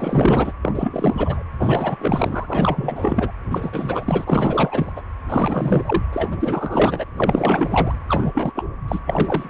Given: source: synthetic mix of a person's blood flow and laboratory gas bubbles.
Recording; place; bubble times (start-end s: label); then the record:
Doppler ultrasound of blood flow; precordium
0.00-0.53 s: bubbles
0.62-1.44 s: bubbles
1.59-3.31 s: bubbles
3.49-4.91 s: bubbles
4.96-5.02 s: bubbles
5.27-6.02 s: bubbles
6.12-7.04 s: bubbles
7.16-7.95 s: bubbles
8.07-8.51 s: bubbles
8.54-8.66 s: bubbles
8.88-9.00 s: bubbles
9.06-9.50 s: bubbles
From the record:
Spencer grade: 4 (maximum detectable bubble signal sounding continuously throughout systole and diastole of every cardiac period, and overriding the amplitude of the normal cardiac signals); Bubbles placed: anywhere in the cardiac cycle